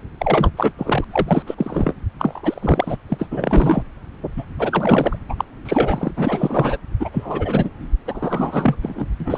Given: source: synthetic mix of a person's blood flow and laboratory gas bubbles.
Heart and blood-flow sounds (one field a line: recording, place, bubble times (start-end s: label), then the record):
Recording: Doppler ultrasound of blood flow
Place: subclavian vein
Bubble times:
0.19-0.51 s: bubbles
0.56-0.72 s: bubbles
0.78-1.05 s: bubbles
1.10-1.43 s: bubbles
1.46-1.94 s: bubbles
2.19-2.96 s: bubbles
3.08-3.28 s: bubbles
3.31-3.83 s: bubbles
4.37-4.44 s: bubbles
4.58-5.17 s: bubbles
5.29-5.35 s: bubbles
5.38-5.45 s: bubbles
5.65-6.11 s: bubbles
6.17-6.78 s: bubbles
7.00-7.70 s: bubbles
8.07-8.77 s: bubbles
8.82-9.05 s: bubbles
9.20-9.38 s: bubbles
From the record:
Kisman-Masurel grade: 343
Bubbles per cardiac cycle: rolling drumbeat, 9 or more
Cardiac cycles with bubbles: 100%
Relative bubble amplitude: loud (0.450 to 0.775)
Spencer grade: 3 (all of the cardiac periods contain showers or single bubble signals, but not dominating or overriding the cardiac motion signals)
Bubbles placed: anywhere in the cardiac cycle